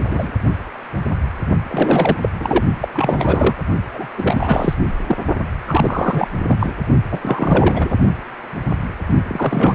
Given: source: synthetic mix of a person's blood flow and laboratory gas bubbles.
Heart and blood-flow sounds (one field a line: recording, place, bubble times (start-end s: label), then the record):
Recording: Doppler ultrasound of blood flow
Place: precordium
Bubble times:
0.07-0.31 s: bubbles
1.69-2.17 s: bubbles
2.21-2.29 s: bubbles
2.40-2.65 s: bubbles
2.81-2.88 s: bubbles
2.94-3.53 s: bubbles
3.93-4.08 s: bubbles
4.18-4.74 s: bubbles
5.07-5.16 s: bubbles
5.68-6.28 s: bubbles
6.48-6.57 s: bubbles
6.59-6.74 s: bubbles
7.11-7.96 s: bubbles
9.29-9.75 s: bubbles
From the record:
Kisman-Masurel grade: 333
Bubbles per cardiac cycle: rolling drumbeat, 9 or more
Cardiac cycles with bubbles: 50 to 99%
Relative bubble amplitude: loud (0.450 to 0.775)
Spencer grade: 3 (all of the cardiac periods contain showers or single bubble signals, but not dominating or overriding the cardiac motion signals)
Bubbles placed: only in the low amplitude regions of the cardiac cycle